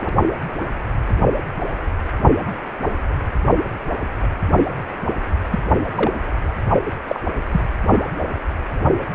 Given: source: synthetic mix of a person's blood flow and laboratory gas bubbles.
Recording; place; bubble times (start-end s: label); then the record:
Doppler ultrasound of blood flow; precordium
5.51-5.58 s: bubbles
5.95-6.11 s: bubbles
7.08-7.20 s: bubbles
7.52-7.61 s: bubbles
From the record:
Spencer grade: 2 (many but less than half of the cardiac periods contain bubble signals, singularly or in groups); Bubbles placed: anywhere in the cardiac cycle